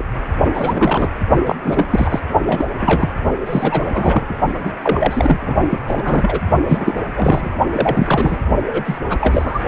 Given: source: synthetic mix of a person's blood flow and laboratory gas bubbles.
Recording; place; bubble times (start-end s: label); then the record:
Doppler ultrasound of blood flow; precordium
0.00-0.04 s: bubbles
0.54-1.10 s: bubbles
1.45-1.55 s: bubbles
1.62-1.85 s: bubbles
1.90-2.19 s: bubbles
2.40-2.69 s: bubbles
2.79-3.09 s: bubbles
3.46-4.34 s: bubbles
4.64-4.70 s: bubbles
4.82-5.55 s: bubbles
5.70-5.79 s: bubbles
5.87-6.39 s: bubbles
6.68-6.93 s: bubbles
7.14-7.50 s: bubbles
7.71-8.40 s: bubbles
8.66-8.99 s: bubbles
9.09-9.60 s: bubbles
From the record:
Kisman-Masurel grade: 343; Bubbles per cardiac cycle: rolling drumbeat, 9 or more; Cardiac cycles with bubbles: 100%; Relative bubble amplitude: loud (0.450 to 0.775); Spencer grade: 3 (all of the cardiac periods contain showers or single bubble signals, but not dominating or overriding the cardiac motion signals); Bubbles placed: only in the low amplitude regions of the cardiac cycle